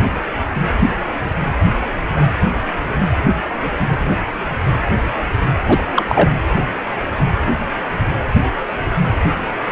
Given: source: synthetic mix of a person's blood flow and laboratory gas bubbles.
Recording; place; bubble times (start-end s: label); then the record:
Doppler ultrasound of blood flow; precordium
5.65-5.83 s: bubbles
5.96-6.06 s: bubbles
6.09-6.30 s: bubbles
From the record:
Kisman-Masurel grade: 213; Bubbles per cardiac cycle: several, 3 to 8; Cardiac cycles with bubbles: 1 to 10%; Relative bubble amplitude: loud (0.450 to 0.775); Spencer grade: 1 (occasional bubble signal discernible with the cardiac motion signal, with majority of cardiac periods free of bubbles); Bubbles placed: anywhere in the cardiac cycle